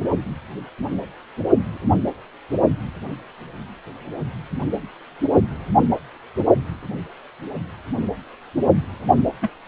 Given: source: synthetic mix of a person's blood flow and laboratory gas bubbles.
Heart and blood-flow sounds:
Doppler ultrasound of blood flow; precordium
9.41-9.50 s: bubbles
From the record:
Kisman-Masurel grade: 212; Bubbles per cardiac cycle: several, 3 to 8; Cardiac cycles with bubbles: 1 to 10%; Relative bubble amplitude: moderate (0.250 to 0.450); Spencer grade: 1 (occasional bubble signal discernible with the cardiac motion signal, with majority of cardiac periods free of bubbles); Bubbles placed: only in the low amplitude regions of the cardiac cycle

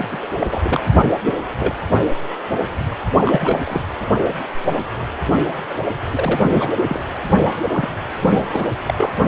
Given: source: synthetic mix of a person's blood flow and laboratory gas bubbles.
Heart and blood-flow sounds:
Doppler ultrasound of blood flow; precordium
0.00-0.05 s: bubbles
0.11-0.19 s: bubbles
0.22-0.28 s: bubbles
0.40-0.47 s: bubbles
0.52-0.59 s: bubbles
0.62-0.80 s: bubbles
1.25-1.33 s: bubbles
1.59-1.73 s: bubbles
3.25-3.82 s: bubbles
6.09-6.40 s: bubbles
6.47-6.69 s: bubbles
6.88-6.99 s: bubbles
7.63-7.89 s: bubbles
8.18-8.68 s: bubbles
8.86-9.12 s: bubbles
From the record:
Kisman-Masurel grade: 232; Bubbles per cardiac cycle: several, 3 to 8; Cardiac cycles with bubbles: 50 to 99%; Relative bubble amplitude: moderate (0.250 to 0.450); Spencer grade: 3 (all of the cardiac periods contain showers or single bubble signals, but not dominating or overriding the cardiac motion signals); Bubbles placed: only in the low amplitude regions of the cardiac cycle

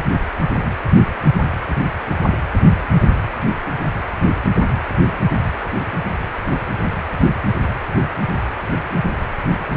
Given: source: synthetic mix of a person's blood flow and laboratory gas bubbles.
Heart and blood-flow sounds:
Doppler ultrasound of blood flow; precordium
9.73-9.77 s: bubbles
From the record:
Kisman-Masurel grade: 112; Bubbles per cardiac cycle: 1 to 2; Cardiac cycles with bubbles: 1 to 10%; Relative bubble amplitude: moderate (0.250 to 0.450); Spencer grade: 1 (occasional bubble signal discernible with the cardiac motion signal, with majority of cardiac periods free of bubbles); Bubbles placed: anywhere in the cardiac cycle

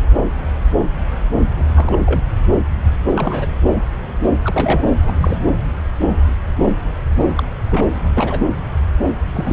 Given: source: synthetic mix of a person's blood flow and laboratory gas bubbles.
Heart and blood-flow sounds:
Doppler ultrasound of blood flow; subclavian vein
1.59-1.63 s: bubbles
1.76-1.97 s: bubbles
2.05-2.20 s: bubbles
3.15-3.47 s: bubbles
4.44-4.88 s: bubbles
5.07-5.12 s: bubbles
5.21-5.39 s: bubbles
7.35-7.44 s: bubbles
7.70-7.88 s: bubbles
8.02-8.48 s: bubbles
9.33-9.53 s: bubbles
From the record:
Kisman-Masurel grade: 232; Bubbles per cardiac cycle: several, 3 to 8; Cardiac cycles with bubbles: 50 to 99%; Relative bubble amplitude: moderate (0.250 to 0.450); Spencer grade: 3 (all of the cardiac periods contain showers or single bubble signals, but not dominating or overriding the cardiac motion signals); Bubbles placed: anywhere in the cardiac cycle

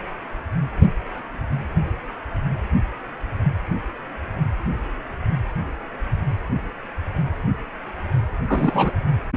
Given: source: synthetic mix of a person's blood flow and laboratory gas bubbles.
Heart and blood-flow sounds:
Doppler ultrasound of blood flow; precordium
8.47-8.92 s: bubbles
From the record:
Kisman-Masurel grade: 213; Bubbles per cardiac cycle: several, 3 to 8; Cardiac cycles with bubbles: 1 to 10%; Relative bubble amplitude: loud (0.450 to 0.775); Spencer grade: 1 (occasional bubble signal discernible with the cardiac motion signal, with majority of cardiac periods free of bubbles); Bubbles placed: anywhere in the cardiac cycle

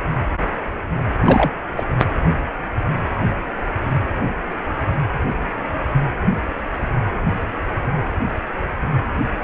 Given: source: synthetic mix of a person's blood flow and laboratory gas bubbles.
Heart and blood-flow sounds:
Doppler ultrasound of blood flow; precordium
1.21-1.51 s: bubbles
1.76-1.84 s: bubbles
From the record:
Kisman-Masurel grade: 213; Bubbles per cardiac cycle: several, 3 to 8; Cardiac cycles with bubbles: 1 to 10%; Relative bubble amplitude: loud (0.450 to 0.775); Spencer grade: 1 (occasional bubble signal discernible with the cardiac motion signal, with majority of cardiac periods free of bubbles); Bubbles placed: anywhere in the cardiac cycle

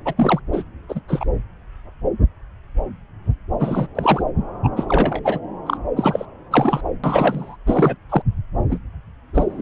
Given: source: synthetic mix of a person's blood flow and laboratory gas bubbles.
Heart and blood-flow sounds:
Doppler ultrasound of blood flow; subclavian vein
0.05-0.14 s: bubbles
0.16-0.40 s: bubbles
0.52-0.64 s: bubbles
0.89-1.00 s: bubbles
1.08-1.24 s: bubbles
3.59-3.87 s: bubbles
3.95-4.23 s: bubbles
4.63-4.69 s: bubbles
4.77-4.86 s: bubbles
4.89-5.39 s: bubbles
5.66-5.78 s: bubbles
5.96-6.25 s: bubbles
6.50-6.81 s: bubbles
7.04-7.56 s: bubbles
7.66-7.97 s: bubbles
8.09-8.22 s: bubbles
8.68-8.79 s: bubbles
9.34-9.62 s: bubbles
From the record:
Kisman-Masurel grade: 232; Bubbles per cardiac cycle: several, 3 to 8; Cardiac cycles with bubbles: 50 to 99%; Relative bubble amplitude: moderate (0.250 to 0.450); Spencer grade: 3 (all of the cardiac periods contain showers or single bubble signals, but not dominating or overriding the cardiac motion signals); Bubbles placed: anywhere in the cardiac cycle

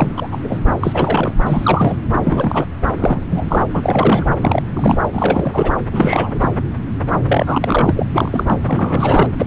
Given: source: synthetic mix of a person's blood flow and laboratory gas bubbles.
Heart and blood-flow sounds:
Doppler ultrasound of blood flow; subclavian vein
0.00-0.28 s: bubbles
0.32-0.38 s: bubbles
0.43-0.59 s: bubbles
0.83-1.33 s: bubbles
1.46-1.97 s: bubbles
2.23-2.67 s: bubbles
2.94-3.66 s: bubbles
3.73-4.25 s: bubbles
4.41-4.62 s: bubbles
4.73-4.97 s: bubbles
5.12-5.72 s: bubbles
5.92-6.49 s: bubbles
7.27-8.06 s: bubbles
8.14-8.44 s: bubbles
8.46-8.58 s: bubbles
8.67-9.28 s: bubbles
9.38-9.46 s: bubbles
From the record:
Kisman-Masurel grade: 342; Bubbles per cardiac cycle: rolling drumbeat, 9 or more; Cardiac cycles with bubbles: 100%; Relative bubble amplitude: moderate (0.250 to 0.450); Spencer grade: 3 (all of the cardiac periods contain showers or single bubble signals, but not dominating or overriding the cardiac motion signals); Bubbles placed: anywhere in the cardiac cycle

